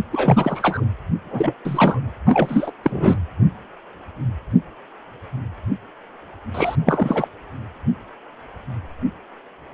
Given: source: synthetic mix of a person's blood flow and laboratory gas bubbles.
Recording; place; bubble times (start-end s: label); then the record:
Doppler ultrasound of blood flow; precordium
0.12-0.84 s: bubbles
1.24-1.54 s: bubbles
1.65-2.00 s: bubbles
2.26-2.71 s: bubbles
2.83-3.17 s: bubbles
6.54-6.76 s: bubbles
6.86-7.28 s: bubbles
From the record:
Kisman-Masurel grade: 333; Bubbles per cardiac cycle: rolling drumbeat, 9 or more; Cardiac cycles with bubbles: 50 to 99%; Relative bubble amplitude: loud (0.450 to 0.775); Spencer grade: 3 (all of the cardiac periods contain showers or single bubble signals, but not dominating or overriding the cardiac motion signals); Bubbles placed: anywhere in the cardiac cycle